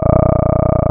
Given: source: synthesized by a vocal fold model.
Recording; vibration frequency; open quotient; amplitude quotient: sustained vowel; 30 Hz; 0.2; 1.1